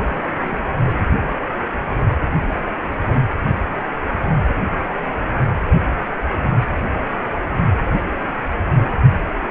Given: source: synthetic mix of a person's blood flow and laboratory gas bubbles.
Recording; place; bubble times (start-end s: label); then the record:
Doppler ultrasound of blood flow; precordium
0.07-0.26 s: bubbles
0.42-0.59 s: bubbles
0.86-1.06 s: bubbles
From the record:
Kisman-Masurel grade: 211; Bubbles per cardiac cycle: several, 3 to 8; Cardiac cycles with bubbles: 1 to 10%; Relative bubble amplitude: barely perceptible (0.100 to 0.250); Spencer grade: 1 (occasional bubble signal discernible with the cardiac motion signal, with majority of cardiac periods free of bubbles); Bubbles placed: anywhere in the cardiac cycle